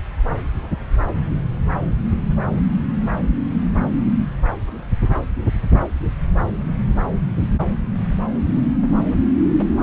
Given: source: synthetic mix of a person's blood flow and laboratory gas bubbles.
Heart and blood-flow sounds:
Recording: Doppler ultrasound of blood flow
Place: subclavian vein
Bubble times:
5.71-5.88 s: bubbles
6.96-7.00 s: bubbles
7.39-7.47 s: bubbles
From the record:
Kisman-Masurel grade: 111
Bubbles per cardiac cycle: 1 to 2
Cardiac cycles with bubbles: 1 to 10%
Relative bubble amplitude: barely perceptible (0.100 to 0.250)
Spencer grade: 1 (occasional bubble signal discernible with the cardiac motion signal, with majority of cardiac periods free of bubbles)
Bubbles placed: anywhere in the cardiac cycle

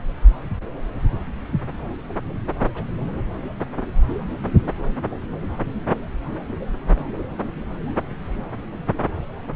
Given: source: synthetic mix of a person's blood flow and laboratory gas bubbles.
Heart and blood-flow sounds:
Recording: Doppler ultrasound of blood flow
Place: subclavian vein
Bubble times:
2.56-2.65 s: bubbles
2.74-2.84 s: bubbles
6.96-7.10 s: bubbles
From the record:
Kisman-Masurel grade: 111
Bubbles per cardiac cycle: 1 to 2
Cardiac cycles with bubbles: 1 to 10%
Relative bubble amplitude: barely perceptible (0.100 to 0.250)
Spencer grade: 1 (occasional bubble signal discernible with the cardiac motion signal, with majority of cardiac periods free of bubbles)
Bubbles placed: anywhere in the cardiac cycle

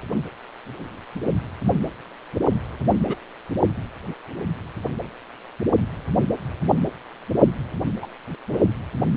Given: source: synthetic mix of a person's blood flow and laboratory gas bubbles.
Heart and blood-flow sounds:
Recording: Doppler ultrasound of blood flow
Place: precordium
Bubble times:
3.08-3.15 s: bubbles
8.01-8.06 s: bubbles
8.48-8.58 s: bubbles
From the record:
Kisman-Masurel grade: 121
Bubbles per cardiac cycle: 1 to 2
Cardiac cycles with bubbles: 10 to 50%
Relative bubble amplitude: barely perceptible (0.100 to 0.250)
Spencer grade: 2 (many but less than half of the cardiac periods contain bubble signals, singularly or in groups)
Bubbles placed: only in the low amplitude regions of the cardiac cycle

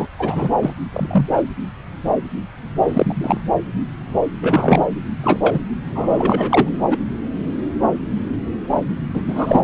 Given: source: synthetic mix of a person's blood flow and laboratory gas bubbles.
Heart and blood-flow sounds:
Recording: Doppler ultrasound of blood flow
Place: subclavian vein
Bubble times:
0.00-0.07 s: bubbles
0.19-0.50 s: bubbles
0.61-0.73 s: bubbles
0.93-1.26 s: bubbles
1.31-1.41 s: bubbles
2.88-3.41 s: bubbles
4.42-4.85 s: bubbles
5.23-5.60 s: bubbles
5.95-6.69 s: bubbles
6.90-6.98 s: bubbles
9.13-9.22 s: bubbles
9.26-9.64 s: bubbles
From the record:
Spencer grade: 3 (all of the cardiac periods contain showers or single bubble signals, but not dominating or overriding the cardiac motion signals)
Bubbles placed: anywhere in the cardiac cycle

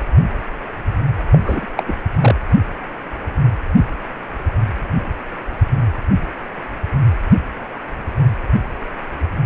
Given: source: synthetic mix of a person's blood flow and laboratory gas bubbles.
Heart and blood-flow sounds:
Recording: Doppler ultrasound of blood flow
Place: precordium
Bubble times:
1.32-1.67 s: bubbles
1.76-1.84 s: bubbles
1.87-1.96 s: bubbles
2.21-2.35 s: bubbles
From the record:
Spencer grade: 2 (many but less than half of the cardiac periods contain bubble signals, singularly or in groups)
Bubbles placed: anywhere in the cardiac cycle

